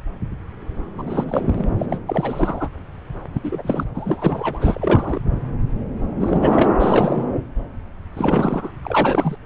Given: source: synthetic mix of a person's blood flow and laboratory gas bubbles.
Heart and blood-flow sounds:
Doppler ultrasound of blood flow; subclavian vein
0.98-1.25 s: bubbles
1.28-1.42 s: bubbles
1.46-1.66 s: bubbles
1.79-1.86 s: bubbles
1.89-1.98 s: bubbles
2.07-2.69 s: bubbles
3.35-3.40 s: bubbles
3.44-3.84 s: bubbles
3.95-5.21 s: bubbles
6.21-6.71 s: bubbles
6.79-7.25 s: bubbles
8.13-8.71 s: bubbles
8.83-9.36 s: bubbles
From the record:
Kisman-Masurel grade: 332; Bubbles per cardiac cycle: rolling drumbeat, 9 or more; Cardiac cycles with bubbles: 50 to 99%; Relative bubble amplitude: moderate (0.250 to 0.450); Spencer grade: 3 (all of the cardiac periods contain showers or single bubble signals, but not dominating or overriding the cardiac motion signals); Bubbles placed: anywhere in the cardiac cycle

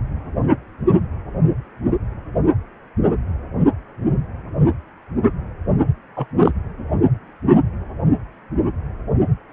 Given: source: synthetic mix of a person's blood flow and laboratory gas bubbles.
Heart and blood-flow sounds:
Doppler ultrasound of blood flow; precordium
6.16-6.26 s: bubbles
6.40-6.52 s: bubbles
From the record:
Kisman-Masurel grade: 213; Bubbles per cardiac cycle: several, 3 to 8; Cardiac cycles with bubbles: 1 to 10%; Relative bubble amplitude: loud (0.450 to 0.775); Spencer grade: 1 (occasional bubble signal discernible with the cardiac motion signal, with majority of cardiac periods free of bubbles); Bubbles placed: anywhere in the cardiac cycle

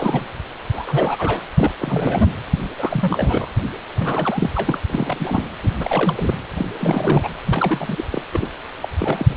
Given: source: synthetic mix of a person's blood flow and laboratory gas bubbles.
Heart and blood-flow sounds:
Doppler ultrasound of blood flow; precordium
0.00-0.26 s: bubbles
0.70-1.42 s: bubbles
1.56-1.72 s: bubbles
1.78-2.29 s: bubbles
2.78-3.50 s: bubbles
3.99-4.50 s: bubbles
4.53-4.80 s: bubbles
4.89-5.49 s: bubbles
5.63-5.73 s: bubbles
5.78-6.38 s: bubbles
6.57-6.71 s: bubbles
6.79-7.29 s: bubbles
7.46-8.04 s: bubbles
8.11-8.22 s: bubbles
8.32-8.49 s: bubbles
8.81-8.88 s: bubbles
8.99-9.26 s: bubbles
9.29-9.36 s: bubbles
From the record:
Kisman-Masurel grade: 342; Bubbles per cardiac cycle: rolling drumbeat, 9 or more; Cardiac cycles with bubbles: 100%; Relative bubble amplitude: moderate (0.250 to 0.450); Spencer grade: 3 (all of the cardiac periods contain showers or single bubble signals, but not dominating or overriding the cardiac motion signals); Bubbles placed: anywhere in the cardiac cycle

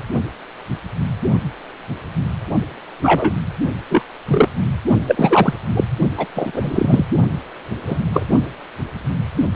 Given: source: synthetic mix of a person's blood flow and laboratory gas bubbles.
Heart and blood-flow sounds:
Doppler ultrasound of blood flow; precordium
3.02-3.33 s: bubbles
3.89-4.03 s: bubbles
4.28-4.49 s: bubbles
5.07-5.54 s: bubbles
5.75-5.84 s: bubbles
6.17-6.28 s: bubbles
6.35-7.05 s: bubbles
7.87-7.98 s: bubbles
8.12-8.26 s: bubbles
From the record:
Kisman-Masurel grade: 233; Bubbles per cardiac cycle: several, 3 to 8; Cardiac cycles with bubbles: 50 to 99%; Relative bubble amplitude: loud (0.450 to 0.775); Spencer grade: 3 (all of the cardiac periods contain showers or single bubble signals, but not dominating or overriding the cardiac motion signals); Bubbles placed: only in the low amplitude regions of the cardiac cycle

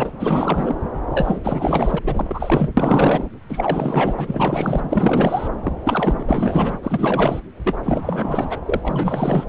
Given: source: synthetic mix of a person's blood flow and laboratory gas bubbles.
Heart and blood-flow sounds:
Doppler ultrasound of blood flow; subclavian vein
0.00-0.11 s: bubbles
0.19-0.75 s: bubbles
1.11-1.41 s: bubbles
1.43-1.99 s: bubbles
2.03-2.70 s: bubbles
2.77-3.25 s: bubbles
3.49-5.48 s: bubbles
5.63-5.73 s: bubbles
5.84-6.24 s: bubbles
6.27-6.79 s: bubbles
6.83-7.40 s: bubbles
7.64-7.80 s: bubbles
7.83-8.59 s: bubbles
8.65-9.46 s: bubbles
From the record:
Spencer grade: 4 (maximum detectable bubble signal sounding continuously throughout systole and diastole of every cardiac period, and overriding the amplitude of the normal cardiac signals); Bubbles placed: anywhere in the cardiac cycle

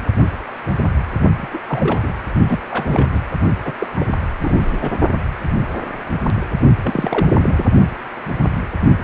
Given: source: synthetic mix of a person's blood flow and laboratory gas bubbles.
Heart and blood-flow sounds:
Doppler ultrasound of blood flow; precordium
1.42-1.47 s: bubbles
1.53-1.58 s: bubbles
1.68-2.13 s: bubbles
2.48-2.60 s: bubbles
2.70-3.08 s: bubbles
3.12-3.20 s: bubbles
3.65-3.72 s: bubbles
3.79-3.88 s: bubbles
3.96-4.06 s: bubbles
4.39-4.92 s: bubbles
6.83-7.64 s: bubbles
From the record:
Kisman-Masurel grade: 332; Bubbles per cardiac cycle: rolling drumbeat, 9 or more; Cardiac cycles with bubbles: 50 to 99%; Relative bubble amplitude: moderate (0.250 to 0.450); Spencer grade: 3 (all of the cardiac periods contain showers or single bubble signals, but not dominating or overriding the cardiac motion signals); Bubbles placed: only in the low amplitude regions of the cardiac cycle

